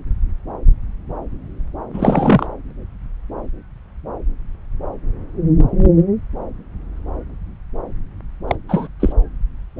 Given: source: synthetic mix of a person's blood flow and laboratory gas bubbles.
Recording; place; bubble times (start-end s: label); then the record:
Doppler ultrasound of blood flow; subclavian vein
1.94-2.47 s: bubbles
8.47-8.55 s: bubbles
8.68-8.88 s: bubbles
8.99-9.12 s: bubbles
From the record:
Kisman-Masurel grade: 223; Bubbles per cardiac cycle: several, 3 to 8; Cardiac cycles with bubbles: 10 to 50%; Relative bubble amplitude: loud (0.450 to 0.775); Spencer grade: 2 (many but less than half of the cardiac periods contain bubble signals, singularly or in groups); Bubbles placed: anywhere in the cardiac cycle